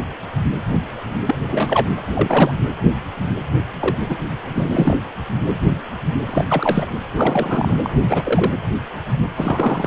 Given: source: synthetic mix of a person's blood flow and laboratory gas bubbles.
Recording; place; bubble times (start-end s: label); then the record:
Doppler ultrasound of blood flow; precordium
1.25-1.35 s: bubbles
1.47-1.88 s: bubbles
2.14-2.55 s: bubbles
3.80-3.97 s: bubbles
4.09-4.17 s: bubbles
4.48-4.96 s: bubbles
6.25-6.44 s: bubbles
6.47-6.85 s: bubbles
7.14-7.74 s: bubbles
7.83-8.53 s: bubbles
9.37-9.86 s: bubbles
From the record:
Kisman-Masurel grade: 232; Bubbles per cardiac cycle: several, 3 to 8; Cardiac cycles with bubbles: 50 to 99%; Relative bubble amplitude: moderate (0.250 to 0.450); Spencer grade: 3 (all of the cardiac periods contain showers or single bubble signals, but not dominating or overriding the cardiac motion signals); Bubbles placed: anywhere in the cardiac cycle